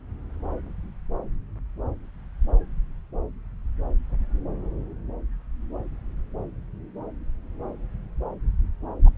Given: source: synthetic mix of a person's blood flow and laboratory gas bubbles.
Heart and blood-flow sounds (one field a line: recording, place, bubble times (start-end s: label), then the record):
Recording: Doppler ultrasound of blood flow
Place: subclavian vein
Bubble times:
9.05-9.10 s: bubbles
From the record:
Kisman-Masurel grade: 111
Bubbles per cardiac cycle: 1 to 2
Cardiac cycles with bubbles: 1 to 10%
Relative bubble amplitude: barely perceptible (0.100 to 0.250)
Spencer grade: 1 (occasional bubble signal discernible with the cardiac motion signal, with majority of cardiac periods free of bubbles)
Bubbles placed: anywhere in the cardiac cycle